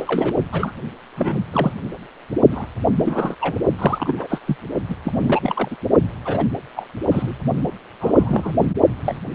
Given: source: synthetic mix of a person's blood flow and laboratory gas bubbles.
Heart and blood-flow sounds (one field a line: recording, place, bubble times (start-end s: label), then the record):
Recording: Doppler ultrasound of blood flow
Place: precordium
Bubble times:
0.00-0.35 s: bubbles
0.52-0.72 s: bubbles
1.16-1.45 s: bubbles
1.52-1.73 s: bubbles
2.51-2.67 s: bubbles
2.97-3.35 s: bubbles
3.41-3.56 s: bubbles
3.79-4.39 s: bubbles
4.46-4.57 s: bubbles
4.88-4.96 s: bubbles
5.04-5.76 s: bubbles
6.25-6.44 s: bubbles
6.76-6.86 s: bubbles
7.11-7.37 s: bubbles
8.00-8.69 s: bubbles
9.04-9.16 s: bubbles
From the record:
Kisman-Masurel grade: 242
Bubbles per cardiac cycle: several, 3 to 8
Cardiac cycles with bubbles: 100%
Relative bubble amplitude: moderate (0.250 to 0.450)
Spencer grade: 3 (all of the cardiac periods contain showers or single bubble signals, but not dominating or overriding the cardiac motion signals)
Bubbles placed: only in the low amplitude regions of the cardiac cycle